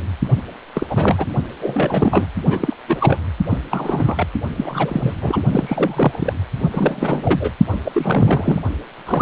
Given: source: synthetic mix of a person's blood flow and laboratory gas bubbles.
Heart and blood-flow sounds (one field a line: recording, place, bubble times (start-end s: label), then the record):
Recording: Doppler ultrasound of blood flow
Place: precordium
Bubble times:
0.00-0.02 s: bubbles
0.74-0.86 s: bubbles
0.90-1.27 s: bubbles
1.61-2.27 s: bubbles
2.49-2.76 s: bubbles
2.88-3.19 s: bubbles
3.50-3.58 s: bubbles
3.71-4.27 s: bubbles
4.56-5.14 s: bubbles
5.21-5.42 s: bubbles
5.51-6.33 s: bubbles
6.71-7.52 s: bubbles
7.67-7.78 s: bubbles
7.85-7.92 s: bubbles
7.95-8.62 s: bubbles
9.06-9.22 s: bubbles
From the record:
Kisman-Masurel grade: 342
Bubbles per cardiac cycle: rolling drumbeat, 9 or more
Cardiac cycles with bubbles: 100%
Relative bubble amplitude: moderate (0.250 to 0.450)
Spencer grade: 3 (all of the cardiac periods contain showers or single bubble signals, but not dominating or overriding the cardiac motion signals)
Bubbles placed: only in the low amplitude regions of the cardiac cycle